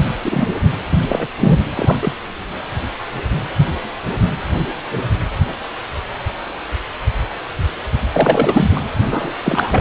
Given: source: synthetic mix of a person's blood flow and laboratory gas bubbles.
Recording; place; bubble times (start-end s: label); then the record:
Doppler ultrasound of blood flow; precordium
0.24-0.52 s: bubbles
1.08-1.27 s: bubbles
1.40-1.65 s: bubbles
1.76-1.98 s: bubbles
2.02-2.12 s: bubbles
8.12-8.71 s: bubbles
8.75-8.80 s: bubbles
9.11-9.32 s: bubbles
9.43-9.81 s: bubbles
From the record:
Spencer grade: 2 (many but less than half of the cardiac periods contain bubble signals, singularly or in groups); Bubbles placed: anywhere in the cardiac cycle